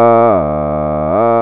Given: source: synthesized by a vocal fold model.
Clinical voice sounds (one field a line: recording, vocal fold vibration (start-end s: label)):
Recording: sustained vowel that changes in the middle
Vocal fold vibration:
0.00-0.25 s: 116.2 Hz, open quotient 0.25
0.45-1.05 s: 75.6 Hz, open quotient 0.28
1.25-1.42 s: 116.2 Hz, open quotient 0.25